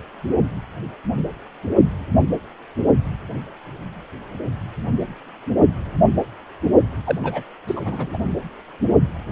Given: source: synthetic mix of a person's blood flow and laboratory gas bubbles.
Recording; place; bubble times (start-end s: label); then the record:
Doppler ultrasound of blood flow; precordium
7.06-7.19 s: bubbles
7.23-7.42 s: bubbles
7.68-7.81 s: bubbles
7.85-8.18 s: bubbles
From the record:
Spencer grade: 1 (occasional bubble signal discernible with the cardiac motion signal, with majority of cardiac periods free of bubbles); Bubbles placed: only in the low amplitude regions of the cardiac cycle